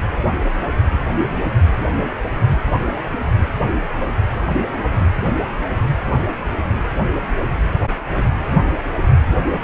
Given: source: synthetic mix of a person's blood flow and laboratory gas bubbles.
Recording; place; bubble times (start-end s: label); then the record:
Doppler ultrasound of blood flow; precordium
no bubbles
From the record:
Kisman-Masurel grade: 000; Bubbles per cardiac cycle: 0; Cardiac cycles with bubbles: 0%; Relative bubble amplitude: no bubbles discernible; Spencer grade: 0 (complete lack of bubble signals)